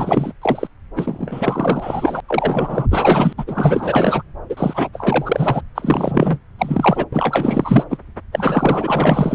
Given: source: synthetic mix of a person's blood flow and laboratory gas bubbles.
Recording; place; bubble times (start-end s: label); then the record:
Doppler ultrasound of blood flow; subclavian vein
0.00-0.32 s: bubbles
0.42-0.67 s: bubbles
0.95-2.21 s: bubbles
2.28-2.87 s: bubbles
2.91-3.33 s: bubbles
3.38-3.44 s: bubbles
3.47-4.23 s: bubbles
4.49-4.88 s: bubbles
4.93-5.62 s: bubbles
5.75-6.39 s: bubbles
6.58-7.05 s: bubbles
7.12-7.84 s: bubbles
7.90-7.97 s: bubbles
8.32-9.35 s: bubbles
From the record:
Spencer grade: 4 (maximum detectable bubble signal sounding continuously throughout systole and diastole of every cardiac period, and overriding the amplitude of the normal cardiac signals); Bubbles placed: anywhere in the cardiac cycle